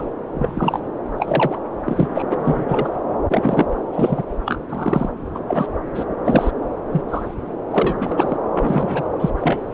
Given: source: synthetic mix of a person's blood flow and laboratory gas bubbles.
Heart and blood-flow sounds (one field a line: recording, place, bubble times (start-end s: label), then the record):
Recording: Doppler ultrasound of blood flow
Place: subclavian vein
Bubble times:
0.00-0.11 s: bubbles
0.34-0.81 s: bubbles
1.17-1.58 s: bubbles
1.85-2.24 s: bubbles
2.30-2.89 s: bubbles
3.29-3.67 s: bubbles
3.92-4.24 s: bubbles
4.46-4.61 s: bubbles
4.69-5.09 s: bubbles
5.34-5.41 s: bubbles
5.47-5.67 s: bubbles
5.94-6.04 s: bubbles
6.25-6.51 s: bubbles
6.91-7.02 s: bubbles
7.08-7.35 s: bubbles
7.70-8.36 s: bubbles
8.54-9.30 s: bubbles
9.38-9.74 s: bubbles
From the record:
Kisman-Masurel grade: 243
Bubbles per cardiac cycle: several, 3 to 8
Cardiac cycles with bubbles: 100%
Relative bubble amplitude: loud (0.450 to 0.775)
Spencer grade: 3 (all of the cardiac periods contain showers or single bubble signals, but not dominating or overriding the cardiac motion signals)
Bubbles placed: anywhere in the cardiac cycle